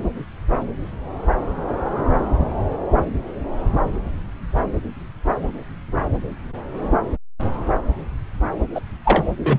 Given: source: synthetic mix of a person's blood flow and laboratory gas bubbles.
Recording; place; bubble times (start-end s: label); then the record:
Doppler ultrasound of blood flow; subclavian vein
8.74-8.80 s: bubbles
9.04-9.23 s: bubbles
9.39-9.59 s: bubbles
From the record:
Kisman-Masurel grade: 213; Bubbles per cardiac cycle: several, 3 to 8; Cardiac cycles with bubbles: 1 to 10%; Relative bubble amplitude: loud (0.450 to 0.775); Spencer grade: 1 (occasional bubble signal discernible with the cardiac motion signal, with majority of cardiac periods free of bubbles); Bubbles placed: anywhere in the cardiac cycle